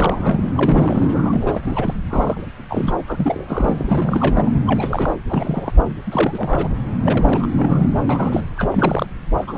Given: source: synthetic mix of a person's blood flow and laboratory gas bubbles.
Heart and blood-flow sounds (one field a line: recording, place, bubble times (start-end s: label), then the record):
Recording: Doppler ultrasound of blood flow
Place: subclavian vein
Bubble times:
0.00-0.47 s: bubbles
0.55-1.94 s: bubbles
2.08-2.48 s: bubbles
2.69-2.96 s: bubbles
3.07-3.44 s: bubbles
3.48-4.51 s: bubbles
4.67-5.14 s: bubbles
5.28-5.92 s: bubbles
6.07-6.69 s: bubbles
7.02-7.47 s: bubbles
7.52-7.90 s: bubbles
8.09-8.44 s: bubbles
8.58-9.09 s: bubbles
9.37-9.45 s: bubbles
9.47-9.58 s: bubbles
From the record:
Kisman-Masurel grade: 342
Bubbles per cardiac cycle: rolling drumbeat, 9 or more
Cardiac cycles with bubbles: 100%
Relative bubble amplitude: moderate (0.250 to 0.450)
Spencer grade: 3 (all of the cardiac periods contain showers or single bubble signals, but not dominating or overriding the cardiac motion signals)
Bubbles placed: anywhere in the cardiac cycle